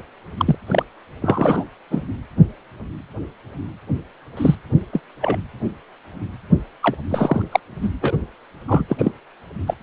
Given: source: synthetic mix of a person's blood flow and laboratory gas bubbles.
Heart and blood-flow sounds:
Doppler ultrasound of blood flow; precordium
0.38-0.55 s: bubbles
0.66-0.83 s: bubbles
1.21-1.65 s: bubbles
1.91-2.01 s: bubbles
4.37-4.55 s: bubbles
4.92-5.00 s: bubbles
5.21-5.37 s: bubbles
6.82-6.97 s: bubbles
7.09-7.42 s: bubbles
7.52-7.59 s: bubbles
7.81-7.90 s: bubbles
8.01-8.17 s: bubbles
8.67-8.83 s: bubbles
8.88-9.11 s: bubbles
9.66-9.74 s: bubbles
From the record:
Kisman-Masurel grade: 233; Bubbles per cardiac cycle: several, 3 to 8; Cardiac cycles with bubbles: 50 to 99%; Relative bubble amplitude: loud (0.450 to 0.775); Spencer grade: 3 (all of the cardiac periods contain showers or single bubble signals, but not dominating or overriding the cardiac motion signals); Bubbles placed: anywhere in the cardiac cycle

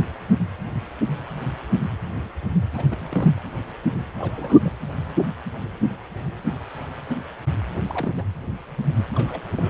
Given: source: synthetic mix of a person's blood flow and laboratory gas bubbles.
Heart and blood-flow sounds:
Doppler ultrasound of blood flow; precordium
2.73-2.85 s: bubbles
2.90-2.97 s: bubbles
3.00-3.31 s: bubbles
4.15-4.72 s: bubbles
7.86-8.24 s: bubbles
9.14-9.52 s: bubbles
9.55-9.70 s: bubbles
From the record:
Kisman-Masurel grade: 221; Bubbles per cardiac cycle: several, 3 to 8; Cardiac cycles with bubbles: 10 to 50%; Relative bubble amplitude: barely perceptible (0.100 to 0.250); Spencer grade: 2 (many but less than half of the cardiac periods contain bubble signals, singularly or in groups); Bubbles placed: anywhere in the cardiac cycle

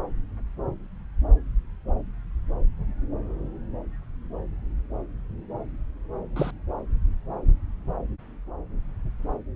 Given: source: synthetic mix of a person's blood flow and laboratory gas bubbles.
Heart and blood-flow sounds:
Doppler ultrasound of blood flow; subclavian vein
6.36-6.51 s: bubbles
From the record:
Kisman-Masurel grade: 122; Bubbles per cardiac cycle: 1 to 2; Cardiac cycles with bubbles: 10 to 50%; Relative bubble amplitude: moderate (0.250 to 0.450); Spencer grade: 2 (many but less than half of the cardiac periods contain bubble signals, singularly or in groups); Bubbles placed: anywhere in the cardiac cycle

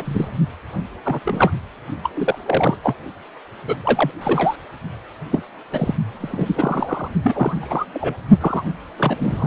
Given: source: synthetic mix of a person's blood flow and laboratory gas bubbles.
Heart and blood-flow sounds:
Doppler ultrasound of blood flow; precordium
0.00-0.28 s: bubbles
1.04-1.20 s: bubbles
1.24-1.51 s: bubbles
2.04-2.10 s: bubbles
2.14-2.39 s: bubbles
2.46-2.78 s: bubbles
2.82-2.95 s: bubbles
3.67-3.76 s: bubbles
3.83-4.11 s: bubbles
4.21-4.56 s: bubbles
5.31-5.42 s: bubbles
5.72-5.95 s: bubbles
6.13-7.08 s: bubbles
7.24-7.86 s: bubbles
7.94-8.14 s: bubbles
8.40-8.64 s: bubbles
8.98-9.47 s: bubbles
From the record:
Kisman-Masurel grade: 242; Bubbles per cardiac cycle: several, 3 to 8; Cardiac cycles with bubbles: 100%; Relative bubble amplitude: moderate (0.250 to 0.450); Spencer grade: 3 (all of the cardiac periods contain showers or single bubble signals, but not dominating or overriding the cardiac motion signals); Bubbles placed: only in the low amplitude regions of the cardiac cycle

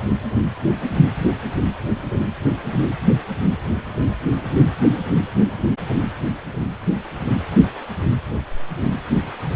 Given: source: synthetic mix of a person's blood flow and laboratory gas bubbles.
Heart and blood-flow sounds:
Doppler ultrasound of blood flow; precordium
no bubbles
From the record:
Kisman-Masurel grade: 000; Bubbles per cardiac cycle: 0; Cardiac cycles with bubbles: 0%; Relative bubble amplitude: no bubbles discernible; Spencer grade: 0 (complete lack of bubble signals)

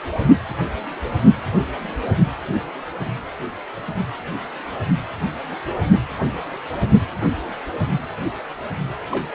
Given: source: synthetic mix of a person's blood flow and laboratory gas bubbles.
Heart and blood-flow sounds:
Doppler ultrasound of blood flow; precordium
9.10-9.27 s: bubbles
From the record:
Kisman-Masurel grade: 111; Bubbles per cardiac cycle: 1 to 2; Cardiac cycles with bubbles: 1 to 10%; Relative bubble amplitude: barely perceptible (0.100 to 0.250); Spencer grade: 1 (occasional bubble signal discernible with the cardiac motion signal, with majority of cardiac periods free of bubbles); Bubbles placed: only in the low amplitude regions of the cardiac cycle

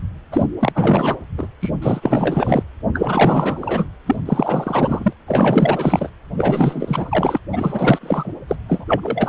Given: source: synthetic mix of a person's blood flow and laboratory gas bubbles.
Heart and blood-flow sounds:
Doppler ultrasound of blood flow; precordium
0.32-0.46 s: bubbles
0.60-1.17 s: bubbles
1.37-1.48 s: bubbles
1.61-1.71 s: bubbles
1.81-2.63 s: bubbles
2.93-3.89 s: bubbles
4.06-4.16 s: bubbles
4.25-5.13 s: bubbles
5.27-6.09 s: bubbles
6.37-7.38 s: bubbles
7.52-8.34 s: bubbles
8.48-8.56 s: bubbles
8.69-8.85 s: bubbles
8.88-9.29 s: bubbles
From the record:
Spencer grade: 4 (maximum detectable bubble signal sounding continuously throughout systole and diastole of every cardiac period, and overriding the amplitude of the normal cardiac signals); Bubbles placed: anywhere in the cardiac cycle

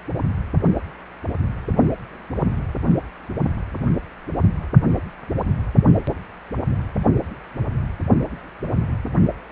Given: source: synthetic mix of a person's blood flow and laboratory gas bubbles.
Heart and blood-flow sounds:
Doppler ultrasound of blood flow; precordium
no bubbles
From the record:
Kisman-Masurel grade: 000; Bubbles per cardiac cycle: 0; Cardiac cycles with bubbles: 0%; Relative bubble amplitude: no bubbles discernible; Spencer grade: 0 (complete lack of bubble signals)

